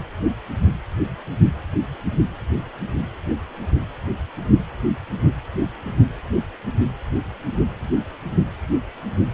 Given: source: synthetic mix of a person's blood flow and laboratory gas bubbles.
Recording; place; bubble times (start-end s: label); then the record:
Doppler ultrasound of blood flow; precordium
no bubbles
From the record:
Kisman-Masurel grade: 000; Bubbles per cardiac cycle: 0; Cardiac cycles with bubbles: 0%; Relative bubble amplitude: no bubbles discernible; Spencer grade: 0 (complete lack of bubble signals)